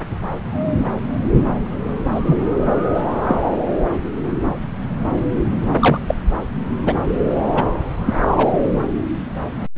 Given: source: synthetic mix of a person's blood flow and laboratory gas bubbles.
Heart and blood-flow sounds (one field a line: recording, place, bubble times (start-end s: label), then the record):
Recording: Doppler ultrasound of blood flow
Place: subclavian vein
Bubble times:
2.15-2.21 s: bubbles
2.27-2.37 s: bubbles
2.94-3.02 s: bubbles
3.28-3.35 s: bubbles
5.80-6.00 s: bubbles
6.07-6.15 s: bubbles
6.86-6.94 s: bubbles
7.57-7.63 s: bubbles
8.05-8.14 s: bubbles
8.32-8.50 s: bubbles
From the record:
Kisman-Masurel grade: 123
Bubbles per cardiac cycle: 1 to 2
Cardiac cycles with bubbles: 10 to 50%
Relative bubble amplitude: loud (0.450 to 0.775)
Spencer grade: 2 (many but less than half of the cardiac periods contain bubble signals, singularly or in groups)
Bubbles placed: anywhere in the cardiac cycle